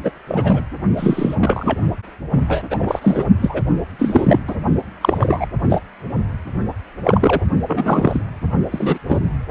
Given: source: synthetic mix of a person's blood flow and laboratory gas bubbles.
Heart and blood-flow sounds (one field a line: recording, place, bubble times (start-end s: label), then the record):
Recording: Doppler ultrasound of blood flow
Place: precordium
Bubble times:
0.03-0.11 s: bubbles
0.27-0.61 s: bubbles
0.96-1.35 s: bubbles
1.40-1.78 s: bubbles
2.31-2.44 s: bubbles
2.48-2.64 s: bubbles
2.70-3.24 s: bubbles
3.42-3.62 s: bubbles
3.99-4.39 s: bubbles
4.48-4.56 s: bubbles
5.01-5.46 s: bubbles
5.70-5.79 s: bubbles
7.04-7.41 s: bubbles
7.67-8.21 s: bubbles
8.71-8.98 s: bubbles
9.07-9.20 s: bubbles
From the record:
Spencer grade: 3 (all of the cardiac periods contain showers or single bubble signals, but not dominating or overriding the cardiac motion signals)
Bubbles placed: only in the low amplitude regions of the cardiac cycle